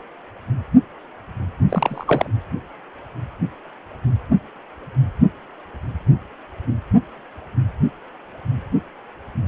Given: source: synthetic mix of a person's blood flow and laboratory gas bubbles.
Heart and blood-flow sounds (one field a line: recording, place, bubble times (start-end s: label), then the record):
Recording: Doppler ultrasound of blood flow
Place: precordium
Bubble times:
1.69-2.28 s: bubbles
From the record:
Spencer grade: 1 (occasional bubble signal discernible with the cardiac motion signal, with majority of cardiac periods free of bubbles)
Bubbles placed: only in the low amplitude regions of the cardiac cycle